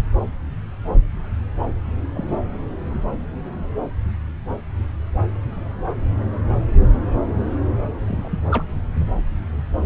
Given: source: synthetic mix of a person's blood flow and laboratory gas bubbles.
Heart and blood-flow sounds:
Doppler ultrasound of blood flow; subclavian vein
2.14-2.38 s: bubbles
8.08-8.38 s: bubbles
8.50-8.63 s: bubbles
From the record:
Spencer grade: 2 (many but less than half of the cardiac periods contain bubble signals, singularly or in groups); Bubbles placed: anywhere in the cardiac cycle

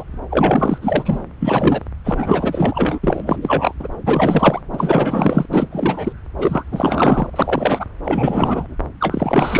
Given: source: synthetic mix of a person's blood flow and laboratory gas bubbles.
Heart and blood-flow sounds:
Doppler ultrasound of blood flow; subclavian vein
0.00-0.03 s: bubbles
0.30-0.78 s: bubbles
0.81-1.24 s: bubbles
1.40-1.83 s: bubbles
2.04-3.00 s: bubbles
3.03-3.74 s: bubbles
3.79-3.88 s: bubbles
4.04-4.62 s: bubbles
4.72-5.46 s: bubbles
5.49-5.68 s: bubbles
5.71-6.12 s: bubbles
6.38-6.63 s: bubbles
6.71-7.30 s: bubbles
7.33-7.89 s: bubbles
8.04-8.76 s: bubbles
9.00-9.60 s: bubbles
From the record:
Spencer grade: 4 (maximum detectable bubble signal sounding continuously throughout systole and diastole of every cardiac period, and overriding the amplitude of the normal cardiac signals); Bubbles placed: anywhere in the cardiac cycle

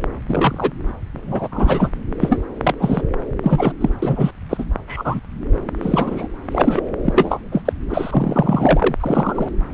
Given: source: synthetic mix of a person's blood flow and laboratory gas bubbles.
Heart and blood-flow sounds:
Doppler ultrasound of blood flow; subclavian vein
0.28-0.72 s: bubbles
1.14-1.48 s: bubbles
1.51-1.90 s: bubbles
2.21-2.41 s: bubbles
2.63-2.75 s: bubbles
2.79-3.02 s: bubbles
3.43-3.73 s: bubbles
3.81-3.90 s: bubbles
4.02-4.31 s: bubbles
4.50-4.65 s: bubbles
4.87-5.19 s: bubbles
5.82-6.26 s: bubbles
6.51-6.85 s: bubbles
7.04-7.40 s: bubbles
7.51-7.61 s: bubbles
7.65-7.73 s: bubbles
7.90-8.96 s: bubbles
9.00-9.49 s: bubbles
From the record:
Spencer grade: 3 (all of the cardiac periods contain showers or single bubble signals, but not dominating or overriding the cardiac motion signals); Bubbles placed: anywhere in the cardiac cycle

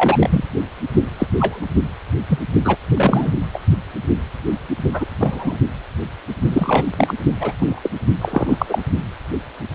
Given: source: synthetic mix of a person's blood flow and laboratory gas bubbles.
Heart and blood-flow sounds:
Doppler ultrasound of blood flow; precordium
0.00-0.44 s: bubbles
1.19-1.27 s: bubbles
1.38-1.65 s: bubbles
2.27-2.38 s: bubbles
2.65-2.76 s: bubbles
2.95-3.33 s: bubbles
3.53-3.59 s: bubbles
4.93-5.05 s: bubbles
5.19-5.56 s: bubbles
6.50-6.84 s: bubbles
6.96-7.13 s: bubbles
7.39-7.52 s: bubbles
7.59-7.80 s: bubbles
7.83-7.90 s: bubbles
8.21-8.66 s: bubbles
8.69-8.82 s: bubbles
From the record:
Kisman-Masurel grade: 233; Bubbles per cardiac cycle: several, 3 to 8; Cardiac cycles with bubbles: 50 to 99%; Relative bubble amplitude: loud (0.450 to 0.775); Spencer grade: 3 (all of the cardiac periods contain showers or single bubble signals, but not dominating or overriding the cardiac motion signals); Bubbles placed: only in the low amplitude regions of the cardiac cycle

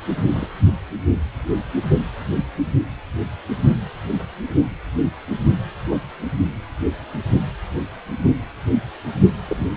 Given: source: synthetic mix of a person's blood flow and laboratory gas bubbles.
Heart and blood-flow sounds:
Doppler ultrasound of blood flow; precordium
0.28-0.50 s: bubbles
5.87-5.98 s: bubbles
9.47-9.69 s: bubbles
From the record:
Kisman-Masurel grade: 122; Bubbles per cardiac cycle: 1 to 2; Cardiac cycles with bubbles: 10 to 50%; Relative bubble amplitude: moderate (0.250 to 0.450); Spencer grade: 2 (many but less than half of the cardiac periods contain bubble signals, singularly or in groups); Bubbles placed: only in the low amplitude regions of the cardiac cycle

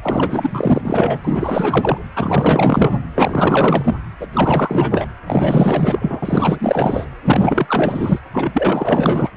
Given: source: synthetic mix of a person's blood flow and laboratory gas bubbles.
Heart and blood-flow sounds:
Doppler ultrasound of blood flow; precordium
0.02-1.21 s: bubbles
1.24-1.98 s: bubbles
2.15-3.01 s: bubbles
3.15-3.95 s: bubbles
4.20-4.27 s: bubbles
4.33-5.06 s: bubbles
5.26-7.05 s: bubbles
7.25-8.19 s: bubbles
8.33-9.30 s: bubbles
From the record:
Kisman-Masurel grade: 444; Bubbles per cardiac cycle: continuous sound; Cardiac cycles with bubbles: 100%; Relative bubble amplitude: maximal (0.775 to 0.999); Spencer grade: 4 (maximum detectable bubble signal sounding continuously throughout systole and diastole of every cardiac period, and overriding the amplitude of the normal cardiac signals); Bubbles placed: anywhere in the cardiac cycle

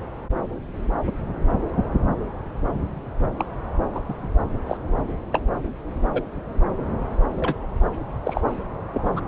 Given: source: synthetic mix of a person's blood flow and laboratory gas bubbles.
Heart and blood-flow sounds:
Doppler ultrasound of blood flow; subclavian vein
3.37-3.45 s: bubbles
3.94-4.01 s: bubbles
4.08-4.14 s: bubbles
4.66-4.77 s: bubbles
5.31-5.40 s: bubbles
6.13-6.22 s: bubbles
7.38-7.56 s: bubbles
8.24-8.41 s: bubbles
8.92-9.21 s: bubbles
From the record:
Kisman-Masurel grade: 122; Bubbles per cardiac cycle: 1 to 2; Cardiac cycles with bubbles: 10 to 50%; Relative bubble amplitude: moderate (0.250 to 0.450); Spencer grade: 2 (many but less than half of the cardiac periods contain bubble signals, singularly or in groups); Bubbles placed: anywhere in the cardiac cycle

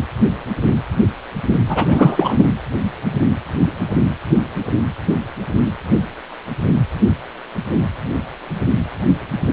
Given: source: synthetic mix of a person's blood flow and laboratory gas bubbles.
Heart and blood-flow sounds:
Doppler ultrasound of blood flow; precordium
1.69-2.53 s: bubbles
From the record:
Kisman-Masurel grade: 213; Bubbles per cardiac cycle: several, 3 to 8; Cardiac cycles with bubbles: 1 to 10%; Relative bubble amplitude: loud (0.450 to 0.775); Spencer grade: 1 (occasional bubble signal discernible with the cardiac motion signal, with majority of cardiac periods free of bubbles); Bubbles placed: anywhere in the cardiac cycle

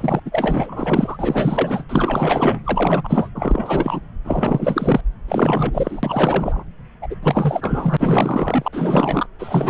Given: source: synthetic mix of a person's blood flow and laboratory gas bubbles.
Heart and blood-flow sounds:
Doppler ultrasound of blood flow; subclavian vein
0.00-0.20 s: bubbles
0.25-1.84 s: bubbles
1.89-2.59 s: bubbles
2.64-3.29 s: bubbles
3.34-4.01 s: bubbles
4.25-5.01 s: bubbles
5.28-6.64 s: bubbles
7.02-7.16 s: bubbles
7.23-8.68 s: bubbles
8.72-9.27 s: bubbles
9.38-9.70 s: bubbles
From the record:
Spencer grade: 4 (maximum detectable bubble signal sounding continuously throughout systole and diastole of every cardiac period, and overriding the amplitude of the normal cardiac signals); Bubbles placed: anywhere in the cardiac cycle

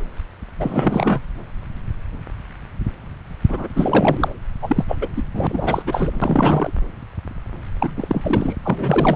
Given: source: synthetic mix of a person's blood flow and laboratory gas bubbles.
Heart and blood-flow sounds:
Doppler ultrasound of blood flow; subclavian vein
0.59-1.21 s: bubbles
3.48-3.67 s: bubbles
3.74-4.33 s: bubbles
4.62-4.84 s: bubbles
4.88-4.96 s: bubbles
5.01-5.08 s: bubbles
5.16-5.22 s: bubbles
5.34-5.83 s: bubbles
5.86-6.11 s: bubbles
6.21-6.71 s: bubbles
7.79-8.55 s: bubbles
8.63-9.16 s: bubbles
From the record:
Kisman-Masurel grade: 332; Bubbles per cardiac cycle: rolling drumbeat, 9 or more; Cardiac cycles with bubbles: 50 to 99%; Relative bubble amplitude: moderate (0.250 to 0.450); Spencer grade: 3 (all of the cardiac periods contain showers or single bubble signals, but not dominating or overriding the cardiac motion signals); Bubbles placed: anywhere in the cardiac cycle

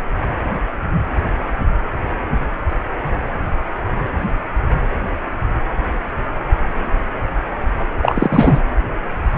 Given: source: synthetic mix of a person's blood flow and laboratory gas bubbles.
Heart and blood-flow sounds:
Doppler ultrasound of blood flow; precordium
8.02-8.61 s: bubbles
From the record:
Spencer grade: 1 (occasional bubble signal discernible with the cardiac motion signal, with majority of cardiac periods free of bubbles); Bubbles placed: anywhere in the cardiac cycle

